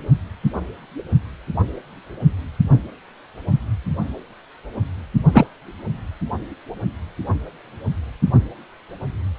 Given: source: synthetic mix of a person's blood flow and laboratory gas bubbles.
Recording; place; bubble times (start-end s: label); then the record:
Doppler ultrasound of blood flow; precordium
5.33-5.46 s: bubbles
From the record:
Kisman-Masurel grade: 113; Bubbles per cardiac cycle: 1 to 2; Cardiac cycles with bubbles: 1 to 10%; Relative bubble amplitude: loud (0.450 to 0.775); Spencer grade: 1 (occasional bubble signal discernible with the cardiac motion signal, with majority of cardiac periods free of bubbles); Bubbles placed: only in the low amplitude regions of the cardiac cycle